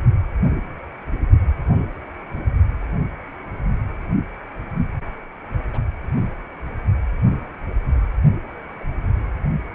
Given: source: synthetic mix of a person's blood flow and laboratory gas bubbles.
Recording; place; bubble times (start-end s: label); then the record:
Doppler ultrasound of blood flow; precordium
5.73-5.79 s: bubbles
8.80-8.84 s: bubbles
From the record:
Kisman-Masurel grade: 121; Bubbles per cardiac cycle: 1 to 2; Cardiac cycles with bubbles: 10 to 50%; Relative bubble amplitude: barely perceptible (0.100 to 0.250); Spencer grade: 2 (many but less than half of the cardiac periods contain bubble signals, singularly or in groups); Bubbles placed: only in the low amplitude regions of the cardiac cycle